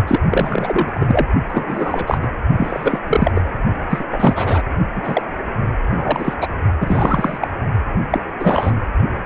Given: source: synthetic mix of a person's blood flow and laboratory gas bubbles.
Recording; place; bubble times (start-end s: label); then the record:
Doppler ultrasound of blood flow; precordium
0.07-0.20 s: bubbles
0.30-1.27 s: bubbles
1.49-2.18 s: bubbles
2.21-2.28 s: bubbles
2.58-2.99 s: bubbles
3.08-3.31 s: bubbles
3.35-3.42 s: bubbles
3.90-4.04 s: bubbles
4.11-4.63 s: bubbles
4.93-5.22 s: bubbles
5.96-6.34 s: bubbles
6.38-6.53 s: bubbles
6.79-7.38 s: bubbles
7.40-7.48 s: bubbles
8.11-8.20 s: bubbles
8.39-8.79 s: bubbles
From the record:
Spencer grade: 3 (all of the cardiac periods contain showers or single bubble signals, but not dominating or overriding the cardiac motion signals); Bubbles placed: only in the low amplitude regions of the cardiac cycle